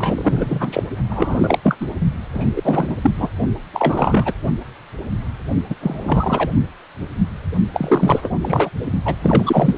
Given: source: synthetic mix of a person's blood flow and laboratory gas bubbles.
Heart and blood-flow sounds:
Doppler ultrasound of blood flow; precordium
0.00-0.83 s: bubbles
1.09-1.58 s: bubbles
1.62-1.77 s: bubbles
1.80-1.87 s: bubbles
2.33-2.52 s: bubbles
2.56-2.98 s: bubbles
3.02-3.12 s: bubbles
3.18-3.29 s: bubbles
3.73-4.33 s: bubbles
5.70-5.75 s: bubbles
5.81-6.50 s: bubbles
7.74-8.32 s: bubbles
8.42-8.70 s: bubbles
9.05-9.15 s: bubbles
9.22-9.75 s: bubbles
From the record:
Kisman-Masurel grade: 333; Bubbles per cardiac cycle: rolling drumbeat, 9 or more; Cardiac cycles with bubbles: 50 to 99%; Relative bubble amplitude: loud (0.450 to 0.775); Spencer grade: 3 (all of the cardiac periods contain showers or single bubble signals, but not dominating or overriding the cardiac motion signals); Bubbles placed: only in the low amplitude regions of the cardiac cycle

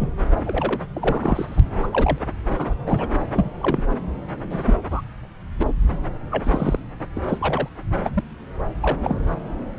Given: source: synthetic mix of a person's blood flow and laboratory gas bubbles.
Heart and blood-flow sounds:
Doppler ultrasound of blood flow; subclavian vein
0.00-0.09 s: bubbles
0.43-0.82 s: bubbles
0.93-1.60 s: bubbles
1.79-1.88 s: bubbles
1.91-2.19 s: bubbles
2.50-2.74 s: bubbles
2.86-3.08 s: bubbles
3.33-3.51 s: bubbles
3.60-3.86 s: bubbles
4.49-4.74 s: bubbles
4.90-5.01 s: bubbles
5.59-5.67 s: bubbles
6.30-6.79 s: bubbles
7.15-7.21 s: bubbles
7.28-7.68 s: bubbles
8.03-8.11 s: bubbles
8.13-8.21 s: bubbles
8.82-8.96 s: bubbles
9.04-9.19 s: bubbles
9.77-9.79 s: bubbles
From the record:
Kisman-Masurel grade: 243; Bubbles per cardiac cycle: several, 3 to 8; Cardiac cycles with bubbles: 100%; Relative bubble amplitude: loud (0.450 to 0.775); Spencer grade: 3 (all of the cardiac periods contain showers or single bubble signals, but not dominating or overriding the cardiac motion signals); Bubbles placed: anywhere in the cardiac cycle

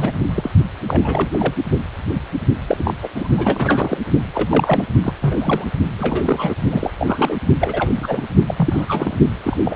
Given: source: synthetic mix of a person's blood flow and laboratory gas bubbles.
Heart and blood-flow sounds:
Doppler ultrasound of blood flow; precordium
0.00-0.20 s: bubbles
0.35-0.51 s: bubbles
0.88-1.54 s: bubbles
2.67-2.94 s: bubbles
3.02-3.09 s: bubbles
3.16-3.27 s: bubbles
3.37-3.98 s: bubbles
4.34-4.46 s: bubbles
4.49-4.84 s: bubbles
5.04-5.13 s: bubbles
5.21-5.65 s: bubbles
5.99-6.54 s: bubbles
6.70-6.92 s: bubbles
6.99-7.37 s: bubbles
7.59-8.25 s: bubbles
8.47-8.54 s: bubbles
8.57-8.85 s: bubbles
8.88-9.15 s: bubbles
9.43-9.57 s: bubbles
9.63-9.76 s: bubbles
From the record:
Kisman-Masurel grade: 232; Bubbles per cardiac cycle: several, 3 to 8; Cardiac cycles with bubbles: 50 to 99%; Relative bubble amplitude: moderate (0.250 to 0.450); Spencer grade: 3 (all of the cardiac periods contain showers or single bubble signals, but not dominating or overriding the cardiac motion signals); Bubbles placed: only in the low amplitude regions of the cardiac cycle

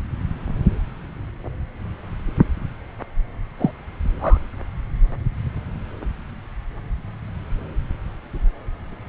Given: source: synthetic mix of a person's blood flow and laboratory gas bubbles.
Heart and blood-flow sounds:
Doppler ultrasound of blood flow; subclavian vein
3.58-3.71 s: bubbles
4.20-4.38 s: bubbles
From the record:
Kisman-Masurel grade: 122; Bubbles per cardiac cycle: 1 to 2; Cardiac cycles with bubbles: 10 to 50%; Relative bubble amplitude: moderate (0.250 to 0.450); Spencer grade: 2 (many but less than half of the cardiac periods contain bubble signals, singularly or in groups); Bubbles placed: anywhere in the cardiac cycle

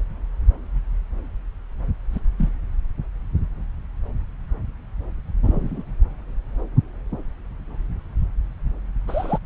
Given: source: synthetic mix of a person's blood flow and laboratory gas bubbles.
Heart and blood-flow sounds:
Doppler ultrasound of blood flow; subclavian vein
2.12-2.20 s: bubbles
2.38-2.49 s: bubbles
5.43-5.83 s: bubbles
9.07-9.39 s: bubbles
From the record:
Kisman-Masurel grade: 121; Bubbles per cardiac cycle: 1 to 2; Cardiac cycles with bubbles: 10 to 50%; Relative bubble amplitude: barely perceptible (0.100 to 0.250); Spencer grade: 2 (many but less than half of the cardiac periods contain bubble signals, singularly or in groups); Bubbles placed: anywhere in the cardiac cycle

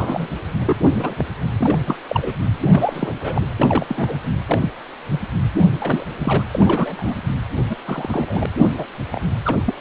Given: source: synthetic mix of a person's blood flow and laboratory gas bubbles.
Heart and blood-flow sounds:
Doppler ultrasound of blood flow; precordium
0.00-0.27 s: bubbles
0.65-0.77 s: bubbles
0.93-1.25 s: bubbles
1.58-1.78 s: bubbles
1.85-1.97 s: bubbles
2.09-2.34 s: bubbles
2.71-3.16 s: bubbles
3.21-3.42 s: bubbles
3.56-4.21 s: bubbles
4.24-4.30 s: bubbles
4.46-4.70 s: bubbles
5.10-5.20 s: bubbles
5.59-5.66 s: bubbles
5.79-6.04 s: bubbles
6.20-6.44 s: bubbles
6.54-7.15 s: bubbles
7.69-7.77 s: bubbles
7.86-8.46 s: bubbles
8.74-8.86 s: bubbles
9.12-9.21 s: bubbles
9.45-9.57 s: bubbles
9.65-9.74 s: bubbles
From the record:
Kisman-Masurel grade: 242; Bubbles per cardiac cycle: several, 3 to 8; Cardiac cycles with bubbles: 100%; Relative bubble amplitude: moderate (0.250 to 0.450); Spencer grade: 3 (all of the cardiac periods contain showers or single bubble signals, but not dominating or overriding the cardiac motion signals); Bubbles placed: anywhere in the cardiac cycle

